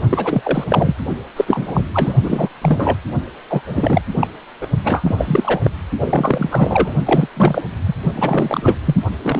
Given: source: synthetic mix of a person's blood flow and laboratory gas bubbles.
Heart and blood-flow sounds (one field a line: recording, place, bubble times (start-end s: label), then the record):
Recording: Doppler ultrasound of blood flow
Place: precordium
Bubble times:
0.10-0.65 s: bubbles
0.70-0.95 s: bubbles
1.36-1.83 s: bubbles
1.93-2.12 s: bubbles
2.23-2.49 s: bubbles
2.62-2.99 s: bubbles
3.48-3.62 s: bubbles
3.67-4.01 s: bubbles
4.19-4.27 s: bubbles
4.61-4.67 s: bubbles
4.84-5.60 s: bubbles
5.63-5.71 s: bubbles
5.97-6.94 s: bubbles
7.05-7.26 s: bubbles
7.36-7.63 s: bubbles
7.86-7.95 s: bubbles
8.15-8.75 s: bubbles
8.85-8.96 s: bubbles
9.22-9.40 s: bubbles
From the record:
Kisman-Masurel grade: 343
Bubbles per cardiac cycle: rolling drumbeat, 9 or more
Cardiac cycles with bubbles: 100%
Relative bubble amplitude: loud (0.450 to 0.775)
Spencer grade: 3 (all of the cardiac periods contain showers or single bubble signals, but not dominating or overriding the cardiac motion signals)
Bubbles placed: only in the low amplitude regions of the cardiac cycle